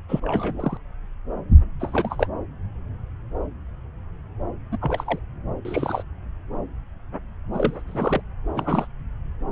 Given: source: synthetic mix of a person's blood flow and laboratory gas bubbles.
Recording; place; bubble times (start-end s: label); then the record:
Doppler ultrasound of blood flow; subclavian vein
0.09-0.78 s: bubbles
1.79-2.27 s: bubbles
4.72-4.78 s: bubbles
4.81-5.20 s: bubbles
5.65-6.03 s: bubbles
7.54-7.82 s: bubbles
7.87-8.21 s: bubbles
8.55-8.87 s: bubbles
From the record:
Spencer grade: 3 (all of the cardiac periods contain showers or single bubble signals, but not dominating or overriding the cardiac motion signals); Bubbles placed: anywhere in the cardiac cycle